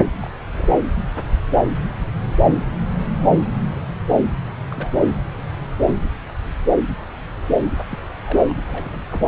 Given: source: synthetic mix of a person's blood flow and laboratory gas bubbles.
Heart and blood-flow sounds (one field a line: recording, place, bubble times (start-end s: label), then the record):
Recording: Doppler ultrasound of blood flow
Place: subclavian vein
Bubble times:
0.21-0.28 s: bubbles
0.52-0.78 s: bubbles
4.69-4.90 s: bubbles
7.91-7.98 s: bubbles
8.24-8.39 s: bubbles
8.49-8.53 s: bubbles
8.67-9.02 s: bubbles
9.09-9.28 s: bubbles
From the record:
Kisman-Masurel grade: 221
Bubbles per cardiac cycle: several, 3 to 8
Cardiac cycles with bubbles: 10 to 50%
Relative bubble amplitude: barely perceptible (0.100 to 0.250)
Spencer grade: 2 (many but less than half of the cardiac periods contain bubble signals, singularly or in groups)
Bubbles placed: anywhere in the cardiac cycle